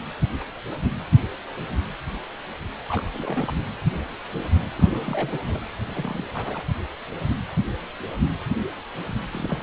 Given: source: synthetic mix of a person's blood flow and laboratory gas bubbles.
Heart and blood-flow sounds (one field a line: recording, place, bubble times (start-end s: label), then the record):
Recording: Doppler ultrasound of blood flow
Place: precordium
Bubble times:
2.88-3.10 s: bubbles
3.13-3.51 s: bubbles
4.78-5.38 s: bubbles
5.47-5.61 s: bubbles
5.80-6.25 s: bubbles
6.33-6.63 s: bubbles
9.31-9.63 s: bubbles
From the record:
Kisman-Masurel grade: 221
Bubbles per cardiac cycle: several, 3 to 8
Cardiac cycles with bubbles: 10 to 50%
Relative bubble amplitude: barely perceptible (0.100 to 0.250)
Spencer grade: 2 (many but less than half of the cardiac periods contain bubble signals, singularly or in groups)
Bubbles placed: anywhere in the cardiac cycle